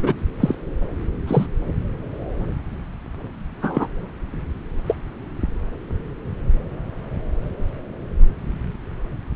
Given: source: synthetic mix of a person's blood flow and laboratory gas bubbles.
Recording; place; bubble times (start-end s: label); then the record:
Doppler ultrasound of blood flow; subclavian vein
0.01-0.14 s: bubbles
0.40-0.55 s: bubbles
1.27-1.46 s: bubbles
3.62-3.87 s: bubbles
4.88-4.95 s: bubbles
From the record:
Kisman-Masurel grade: 123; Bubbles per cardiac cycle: 1 to 2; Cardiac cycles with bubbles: 10 to 50%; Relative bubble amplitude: loud (0.450 to 0.775); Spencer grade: 2 (many but less than half of the cardiac periods contain bubble signals, singularly or in groups); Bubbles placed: anywhere in the cardiac cycle